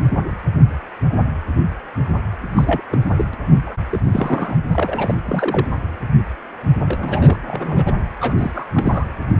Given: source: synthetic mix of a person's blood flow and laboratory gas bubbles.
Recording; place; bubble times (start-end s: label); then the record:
Doppler ultrasound of blood flow; precordium
0.00-0.09 s: bubbles
2.55-2.81 s: bubbles
2.90-3.00 s: bubbles
3.16-3.25 s: bubbles
3.33-3.36 s: bubbles
3.51-3.61 s: bubbles
3.67-3.75 s: bubbles
3.92-3.99 s: bubbles
4.03-4.57 s: bubbles
4.68-5.14 s: bubbles
5.25-5.67 s: bubbles
6.88-7.37 s: bubbles
7.47-7.92 s: bubbles
8.21-8.34 s: bubbles
8.38-8.52 s: bubbles
8.54-8.67 s: bubbles
8.74-9.05 s: bubbles
From the record:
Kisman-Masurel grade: 232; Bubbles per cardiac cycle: several, 3 to 8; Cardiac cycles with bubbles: 50 to 99%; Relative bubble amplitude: moderate (0.250 to 0.450); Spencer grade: 3 (all of the cardiac periods contain showers or single bubble signals, but not dominating or overriding the cardiac motion signals); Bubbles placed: anywhere in the cardiac cycle